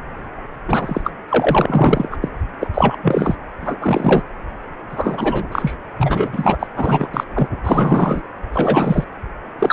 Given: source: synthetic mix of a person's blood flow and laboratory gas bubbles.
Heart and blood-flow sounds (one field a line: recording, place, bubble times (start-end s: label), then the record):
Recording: Doppler ultrasound of blood flow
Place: precordium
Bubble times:
0.67-1.02 s: bubbles
1.04-1.11 s: bubbles
1.28-2.08 s: bubbles
2.11-2.17 s: bubbles
2.21-2.29 s: bubbles
2.60-2.69 s: bubbles
2.73-2.96 s: bubbles
3.03-3.35 s: bubbles
3.62-3.76 s: bubbles
3.81-4.22 s: bubbles
4.89-5.43 s: bubbles
5.51-5.76 s: bubbles
5.97-6.56 s: bubbles
6.59-6.67 s: bubbles
6.76-7.08 s: bubbles
7.13-7.24 s: bubbles
7.34-7.48 s: bubbles
7.64-8.23 s: bubbles
8.53-9.04 s: bubbles
9.58-9.73 s: bubbles
From the record:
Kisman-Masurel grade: 343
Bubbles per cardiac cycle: rolling drumbeat, 9 or more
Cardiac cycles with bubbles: 100%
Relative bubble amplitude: loud (0.450 to 0.775)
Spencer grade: 3 (all of the cardiac periods contain showers or single bubble signals, but not dominating or overriding the cardiac motion signals)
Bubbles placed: anywhere in the cardiac cycle